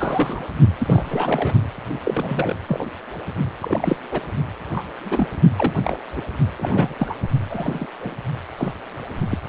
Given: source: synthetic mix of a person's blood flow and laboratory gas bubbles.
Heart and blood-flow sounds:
Doppler ultrasound of blood flow; precordium
0.00-0.44 s: bubbles
0.78-1.03 s: bubbles
1.09-1.54 s: bubbles
2.04-2.56 s: bubbles
2.67-2.87 s: bubbles
3.60-3.96 s: bubbles
4.11-4.21 s: bubbles
4.72-4.84 s: bubbles
5.04-5.27 s: bubbles
5.56-5.74 s: bubbles
5.83-5.99 s: bubbles
6.16-6.21 s: bubbles
6.58-6.93 s: bubbles
6.99-7.15 s: bubbles
7.50-7.88 s: bubbles
8.00-8.15 s: bubbles
8.57-8.71 s: bubbles
9.30-9.38 s: bubbles
From the record:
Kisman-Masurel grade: 242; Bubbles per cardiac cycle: several, 3 to 8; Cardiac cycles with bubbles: 100%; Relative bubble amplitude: moderate (0.250 to 0.450); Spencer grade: 3 (all of the cardiac periods contain showers or single bubble signals, but not dominating or overriding the cardiac motion signals); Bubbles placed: only in the low amplitude regions of the cardiac cycle

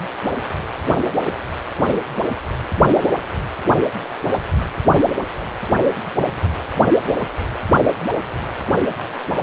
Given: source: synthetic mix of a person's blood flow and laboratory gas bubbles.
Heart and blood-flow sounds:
Doppler ultrasound of blood flow; precordium
no bubbles
From the record:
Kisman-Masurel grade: 000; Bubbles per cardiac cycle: 0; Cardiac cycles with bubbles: 0%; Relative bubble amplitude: no bubbles discernible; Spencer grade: 0 (complete lack of bubble signals)

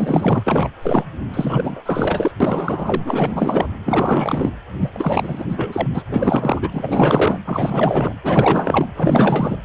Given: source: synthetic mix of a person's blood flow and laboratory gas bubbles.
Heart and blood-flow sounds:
Doppler ultrasound of blood flow; precordium
0.00-0.43 s: bubbles
0.47-0.69 s: bubbles
0.82-1.05 s: bubbles
1.33-1.80 s: bubbles
1.85-2.31 s: bubbles
2.40-3.67 s: bubbles
3.86-4.52 s: bubbles
4.80-5.88 s: bubbles
5.94-6.03 s: bubbles
6.08-7.40 s: bubbles
7.45-8.14 s: bubbles
8.23-8.88 s: bubbles
8.95-9.56 s: bubbles
From the record:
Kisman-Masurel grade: 444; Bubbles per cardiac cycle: continuous sound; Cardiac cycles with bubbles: 100%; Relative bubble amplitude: maximal (0.775 to 0.999); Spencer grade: 4 (maximum detectable bubble signal sounding continuously throughout systole and diastole of every cardiac period, and overriding the amplitude of the normal cardiac signals); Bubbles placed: anywhere in the cardiac cycle

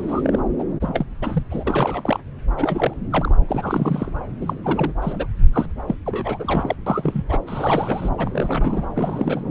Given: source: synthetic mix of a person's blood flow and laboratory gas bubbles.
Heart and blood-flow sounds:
Doppler ultrasound of blood flow; subclavian vein
0.00-0.41 s: bubbles
0.58-0.63 s: bubbles
0.81-1.06 s: bubbles
1.21-1.42 s: bubbles
1.50-1.64 s: bubbles
1.67-2.20 s: bubbles
2.56-2.94 s: bubbles
3.10-3.34 s: bubbles
3.47-4.11 s: bubbles
4.41-4.54 s: bubbles
4.63-4.93 s: bubbles
5.02-5.26 s: bubbles
5.53-5.66 s: bubbles
5.87-5.95 s: bubbles
6.05-6.75 s: bubbles
6.86-7.24 s: bubbles
7.29-7.38 s: bubbles
7.46-8.09 s: bubbles
8.17-8.84 s: bubbles
8.95-9.51 s: bubbles
From the record:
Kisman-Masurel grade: 342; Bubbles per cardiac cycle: rolling drumbeat, 9 or more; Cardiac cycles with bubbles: 100%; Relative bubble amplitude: moderate (0.250 to 0.450); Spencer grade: 3 (all of the cardiac periods contain showers or single bubble signals, but not dominating or overriding the cardiac motion signals); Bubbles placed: anywhere in the cardiac cycle

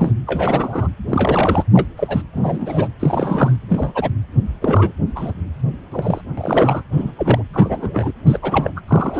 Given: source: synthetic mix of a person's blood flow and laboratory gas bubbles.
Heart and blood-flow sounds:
Doppler ultrasound of blood flow; precordium
0.00-0.12 s: bubbles
0.26-0.89 s: bubbles
1.09-1.65 s: bubbles
1.73-1.87 s: bubbles
1.96-2.23 s: bubbles
2.33-2.88 s: bubbles
3.00-3.57 s: bubbles
3.69-3.92 s: bubbles
3.95-4.11 s: bubbles
4.61-4.95 s: bubbles
5.16-5.33 s: bubbles
5.92-6.21 s: bubbles
6.37-6.83 s: bubbles
6.92-7.12 s: bubbles
7.18-7.43 s: bubbles
7.53-8.12 s: bubbles
8.26-8.38 s: bubbles
8.42-8.72 s: bubbles
8.76-8.80 s: bubbles
8.88-9.19 s: bubbles
From the record:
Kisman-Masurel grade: 242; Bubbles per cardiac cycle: several, 3 to 8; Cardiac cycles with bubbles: 100%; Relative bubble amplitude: moderate (0.250 to 0.450); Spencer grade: 3 (all of the cardiac periods contain showers or single bubble signals, but not dominating or overriding the cardiac motion signals); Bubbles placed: anywhere in the cardiac cycle

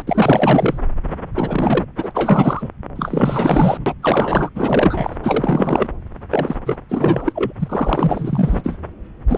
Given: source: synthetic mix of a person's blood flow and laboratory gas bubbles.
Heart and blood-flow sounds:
Doppler ultrasound of blood flow; subclavian vein
0.00-0.02 s: bubbles
0.07-0.78 s: bubbles
1.35-1.84 s: bubbles
1.97-2.11 s: bubbles
2.14-2.70 s: bubbles
2.95-3.94 s: bubbles
4.02-4.50 s: bubbles
4.55-5.16 s: bubbles
5.23-5.88 s: bubbles
6.30-6.55 s: bubbles
6.66-6.76 s: bubbles
6.88-7.53 s: bubbles
7.59-8.79 s: bubbles
9.29-9.38 s: bubbles
From the record:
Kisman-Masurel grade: 444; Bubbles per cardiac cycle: continuous sound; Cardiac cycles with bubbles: 100%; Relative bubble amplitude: maximal (0.775 to 0.999); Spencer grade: 4 (maximum detectable bubble signal sounding continuously throughout systole and diastole of every cardiac period, and overriding the amplitude of the normal cardiac signals); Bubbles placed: anywhere in the cardiac cycle

